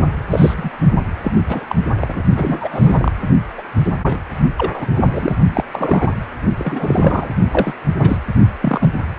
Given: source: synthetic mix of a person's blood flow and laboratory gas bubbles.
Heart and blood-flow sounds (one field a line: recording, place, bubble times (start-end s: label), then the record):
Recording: Doppler ultrasound of blood flow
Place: precordium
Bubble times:
0.30-0.54 s: bubbles
0.58-0.70 s: bubbles
1.23-1.32 s: bubbles
1.49-1.64 s: bubbles
1.68-1.76 s: bubbles
2.00-2.22 s: bubbles
2.37-3.12 s: bubbles
3.57-3.62 s: bubbles
3.75-4.24 s: bubbles
4.57-4.71 s: bubbles
4.73-4.87 s: bubbles
4.96-5.36 s: bubbles
5.55-5.63 s: bubbles
5.71-6.15 s: bubbles
6.58-7.29 s: bubbles
7.49-7.73 s: bubbles
7.98-8.16 s: bubbles
8.62-8.89 s: bubbles
From the record:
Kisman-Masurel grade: 242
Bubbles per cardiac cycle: several, 3 to 8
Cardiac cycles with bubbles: 100%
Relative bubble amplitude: moderate (0.250 to 0.450)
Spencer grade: 3 (all of the cardiac periods contain showers or single bubble signals, but not dominating or overriding the cardiac motion signals)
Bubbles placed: only in the low amplitude regions of the cardiac cycle